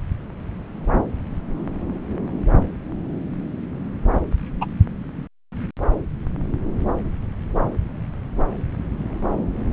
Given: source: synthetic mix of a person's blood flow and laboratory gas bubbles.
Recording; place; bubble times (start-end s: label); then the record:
Doppler ultrasound of blood flow; subclavian vein
4.61-4.66 s: bubbles
From the record:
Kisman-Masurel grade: 113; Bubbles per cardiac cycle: 1 to 2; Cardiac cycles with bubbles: 1 to 10%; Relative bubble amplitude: loud (0.450 to 0.775); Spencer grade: 1 (occasional bubble signal discernible with the cardiac motion signal, with majority of cardiac periods free of bubbles); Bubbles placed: anywhere in the cardiac cycle